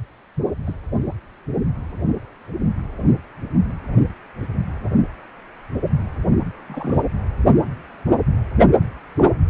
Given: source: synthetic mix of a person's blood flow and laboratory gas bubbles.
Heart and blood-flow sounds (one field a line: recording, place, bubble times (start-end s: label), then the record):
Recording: Doppler ultrasound of blood flow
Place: precordium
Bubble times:
0.66-0.75 s: bubbles
6.67-7.02 s: bubbles
9.18-9.24 s: bubbles
From the record:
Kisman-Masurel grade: 121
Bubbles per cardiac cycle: 1 to 2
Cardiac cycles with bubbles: 10 to 50%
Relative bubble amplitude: barely perceptible (0.100 to 0.250)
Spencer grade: 2 (many but less than half of the cardiac periods contain bubble signals, singularly or in groups)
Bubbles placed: anywhere in the cardiac cycle